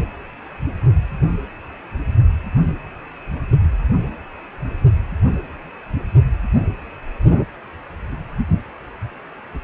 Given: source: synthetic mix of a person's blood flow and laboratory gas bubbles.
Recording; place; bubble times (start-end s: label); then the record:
Doppler ultrasound of blood flow; precordium
no bubbles
From the record:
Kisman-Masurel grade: 000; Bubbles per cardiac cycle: 0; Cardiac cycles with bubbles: 0%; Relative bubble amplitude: no bubbles discernible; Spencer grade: 0 (complete lack of bubble signals)